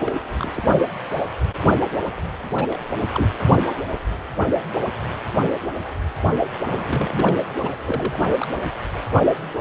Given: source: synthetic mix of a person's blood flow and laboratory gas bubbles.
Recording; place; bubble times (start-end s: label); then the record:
Doppler ultrasound of blood flow; precordium
0.00-0.12 s: bubbles
0.38-0.51 s: bubbles
0.56-0.64 s: bubbles
2.54-2.78 s: bubbles
3.11-3.28 s: bubbles
6.69-7.37 s: bubbles
7.62-7.78 s: bubbles
7.85-8.47 s: bubbles
From the record:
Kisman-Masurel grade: 221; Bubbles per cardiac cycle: several, 3 to 8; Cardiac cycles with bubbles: 10 to 50%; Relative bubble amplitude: barely perceptible (0.100 to 0.250); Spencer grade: 2 (many but less than half of the cardiac periods contain bubble signals, singularly or in groups); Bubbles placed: anywhere in the cardiac cycle